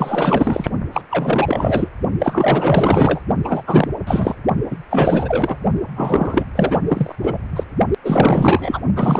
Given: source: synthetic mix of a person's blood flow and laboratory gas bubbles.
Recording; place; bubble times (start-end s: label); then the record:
Doppler ultrasound of blood flow; precordium
0.00-0.69 s: bubbles
0.93-1.02 s: bubbles
1.10-1.89 s: bubbles
2.19-3.22 s: bubbles
3.44-3.61 s: bubbles
3.67-3.88 s: bubbles
4.06-4.36 s: bubbles
4.70-4.77 s: bubbles
4.89-5.56 s: bubbles
5.96-6.46 s: bubbles
6.55-6.77 s: bubbles
6.88-7.15 s: bubbles
7.22-7.38 s: bubbles
7.55-7.63 s: bubbles
8.04-8.80 s: bubbles
8.96-9.20 s: bubbles
From the record:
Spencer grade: 4 (maximum detectable bubble signal sounding continuously throughout systole and diastole of every cardiac period, and overriding the amplitude of the normal cardiac signals); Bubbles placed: only in the low amplitude regions of the cardiac cycle